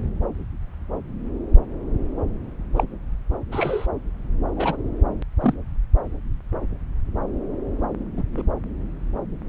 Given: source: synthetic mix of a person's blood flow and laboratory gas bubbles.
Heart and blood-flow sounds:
Doppler ultrasound of blood flow; subclavian vein
2.76-2.84 s: bubbles
3.52-3.86 s: bubbles
4.57-4.76 s: bubbles
5.42-5.54 s: bubbles
8.16-8.23 s: bubbles
8.32-8.42 s: bubbles
From the record:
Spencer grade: 2 (many but less than half of the cardiac periods contain bubble signals, singularly or in groups); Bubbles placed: anywhere in the cardiac cycle

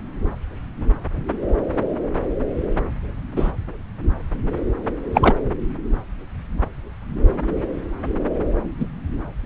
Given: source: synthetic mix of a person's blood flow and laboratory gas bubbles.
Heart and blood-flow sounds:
Doppler ultrasound of blood flow; subclavian vein
3.36-3.51 s: bubbles
5.14-5.35 s: bubbles
8.79-8.85 s: bubbles
From the record:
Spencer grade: 2 (many but less than half of the cardiac periods contain bubble signals, singularly or in groups); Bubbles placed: anywhere in the cardiac cycle

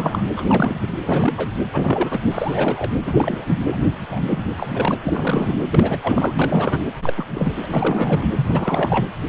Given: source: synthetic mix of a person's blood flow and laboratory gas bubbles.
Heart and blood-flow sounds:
Doppler ultrasound of blood flow; precordium
0.00-0.23 s: bubbles
0.36-0.88 s: bubbles
1.01-1.48 s: bubbles
1.73-2.20 s: bubbles
2.31-2.91 s: bubbles
3.05-3.55 s: bubbles
3.69-3.79 s: bubbles
4.10-4.45 s: bubbles
4.56-4.96 s: bubbles
5.02-5.56 s: bubbles
5.70-5.99 s: bubbles
6.02-6.34 s: bubbles
6.38-6.92 s: bubbles
7.02-7.13 s: bubbles
7.17-7.53 s: bubbles
7.56-7.66 s: bubbles
7.70-8.28 s: bubbles
8.35-9.06 s: bubbles
From the record:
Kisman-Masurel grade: 332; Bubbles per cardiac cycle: rolling drumbeat, 9 or more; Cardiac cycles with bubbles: 50 to 99%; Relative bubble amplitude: moderate (0.250 to 0.450); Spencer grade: 3 (all of the cardiac periods contain showers or single bubble signals, but not dominating or overriding the cardiac motion signals); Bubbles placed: anywhere in the cardiac cycle

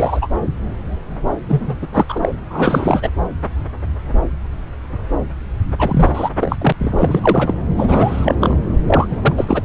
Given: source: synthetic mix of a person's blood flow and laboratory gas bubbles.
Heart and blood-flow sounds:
Doppler ultrasound of blood flow; subclavian vein
0.00-0.28 s: bubbles
1.48-1.76 s: bubbles
1.81-1.87 s: bubbles
1.94-2.05 s: bubbles
2.08-2.31 s: bubbles
2.50-3.09 s: bubbles
5.78-6.10 s: bubbles
6.14-6.29 s: bubbles
6.40-6.56 s: bubbles
6.61-6.73 s: bubbles
6.79-7.54 s: bubbles
7.77-8.35 s: bubbles
8.40-8.54 s: bubbles
8.87-9.07 s: bubbles
9.11-9.62 s: bubbles
From the record:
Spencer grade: 3 (all of the cardiac periods contain showers or single bubble signals, but not dominating or overriding the cardiac motion signals); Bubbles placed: anywhere in the cardiac cycle

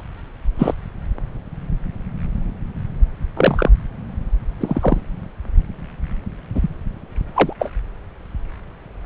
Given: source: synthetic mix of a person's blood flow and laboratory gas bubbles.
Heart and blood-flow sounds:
Doppler ultrasound of blood flow; subclavian vein
0.58-0.75 s: bubbles
3.36-3.69 s: bubbles
4.60-5.00 s: bubbles
6.54-6.68 s: bubbles
7.34-7.53 s: bubbles
7.59-7.69 s: bubbles
From the record:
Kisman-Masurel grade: 123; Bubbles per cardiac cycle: 1 to 2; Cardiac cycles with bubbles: 10 to 50%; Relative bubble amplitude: loud (0.450 to 0.775); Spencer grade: 2 (many but less than half of the cardiac periods contain bubble signals, singularly or in groups); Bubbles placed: anywhere in the cardiac cycle

